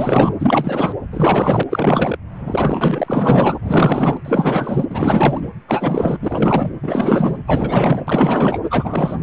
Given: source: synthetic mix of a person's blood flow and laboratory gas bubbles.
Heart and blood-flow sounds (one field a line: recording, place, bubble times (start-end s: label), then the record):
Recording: Doppler ultrasound of blood flow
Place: precordium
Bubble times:
0.00-0.34 s: bubbles
0.39-0.95 s: bubbles
1.11-1.64 s: bubbles
1.69-2.17 s: bubbles
2.37-3.58 s: bubbles
3.62-4.17 s: bubbles
4.25-4.86 s: bubbles
4.90-5.50 s: bubbles
5.67-6.17 s: bubbles
6.21-6.70 s: bubbles
6.82-7.39 s: bubbles
7.46-8.04 s: bubbles
8.07-8.59 s: bubbles
8.70-9.22 s: bubbles
From the record:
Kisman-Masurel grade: 444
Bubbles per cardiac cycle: continuous sound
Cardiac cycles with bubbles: 100%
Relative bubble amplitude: maximal (0.775 to 0.999)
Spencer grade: 4 (maximum detectable bubble signal sounding continuously throughout systole and diastole of every cardiac period, and overriding the amplitude of the normal cardiac signals)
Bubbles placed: anywhere in the cardiac cycle